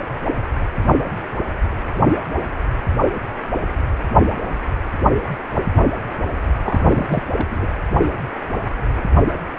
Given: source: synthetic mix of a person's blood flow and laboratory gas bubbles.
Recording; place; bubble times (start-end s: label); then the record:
Doppler ultrasound of blood flow; precordium
6.62-7.06 s: bubbles
7.08-7.23 s: bubbles
7.37-7.46 s: bubbles
7.50-7.67 s: bubbles
From the record:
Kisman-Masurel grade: 211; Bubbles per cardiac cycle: several, 3 to 8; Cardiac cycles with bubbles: 1 to 10%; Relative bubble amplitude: barely perceptible (0.100 to 0.250); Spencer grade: 1 (occasional bubble signal discernible with the cardiac motion signal, with majority of cardiac periods free of bubbles); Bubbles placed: only in the low amplitude regions of the cardiac cycle